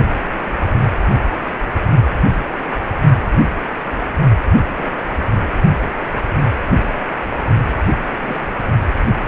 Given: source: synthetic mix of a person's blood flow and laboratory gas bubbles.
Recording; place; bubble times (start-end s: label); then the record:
Doppler ultrasound of blood flow; precordium
4.77-5.18 s: bubbles
5.26-5.32 s: bubbles
8.22-8.50 s: bubbles
From the record:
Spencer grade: 2 (many but less than half of the cardiac periods contain bubble signals, singularly or in groups); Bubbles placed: only in the low amplitude regions of the cardiac cycle